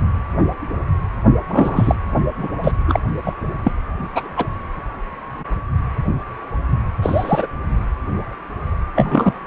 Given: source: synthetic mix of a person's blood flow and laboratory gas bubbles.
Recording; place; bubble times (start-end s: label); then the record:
Doppler ultrasound of blood flow; precordium
1.47-1.95 s: bubbles
2.37-2.48 s: bubbles
2.63-2.72 s: bubbles
2.88-3.00 s: bubbles
3.26-3.33 s: bubbles
3.64-3.71 s: bubbles
4.12-4.28 s: bubbles
4.37-4.48 s: bubbles
7.02-7.47 s: bubbles
8.96-9.39 s: bubbles
From the record:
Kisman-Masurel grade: 223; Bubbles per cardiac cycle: several, 3 to 8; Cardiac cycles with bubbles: 10 to 50%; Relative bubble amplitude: loud (0.450 to 0.775); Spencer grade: 2 (many but less than half of the cardiac periods contain bubble signals, singularly or in groups); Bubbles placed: only in the low amplitude regions of the cardiac cycle